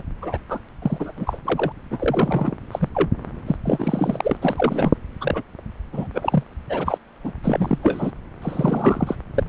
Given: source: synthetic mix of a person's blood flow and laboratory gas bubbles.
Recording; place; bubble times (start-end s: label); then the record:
Doppler ultrasound of blood flow; subclavian vein
0.00-0.02 s: bubbles
0.21-0.38 s: bubbles
0.49-0.59 s: bubbles
0.82-1.12 s: bubbles
1.16-1.40 s: bubbles
1.44-1.72 s: bubbles
1.91-2.56 s: bubbles
2.71-2.89 s: bubbles
2.94-3.10 s: bubbles
3.46-3.56 s: bubbles
3.65-4.37 s: bubbles
4.42-4.92 s: bubbles
5.21-5.42 s: bubbles
5.92-6.08 s: bubbles
6.13-6.43 s: bubbles
6.69-6.98 s: bubbles
7.24-7.33 s: bubbles
7.43-7.79 s: bubbles
7.83-8.11 s: bubbles
8.41-9.15 s: bubbles
9.34-9.43 s: bubbles
From the record:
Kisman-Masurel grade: 243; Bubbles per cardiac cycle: several, 3 to 8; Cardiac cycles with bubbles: 100%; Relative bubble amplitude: loud (0.450 to 0.775); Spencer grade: 3 (all of the cardiac periods contain showers or single bubble signals, but not dominating or overriding the cardiac motion signals); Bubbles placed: anywhere in the cardiac cycle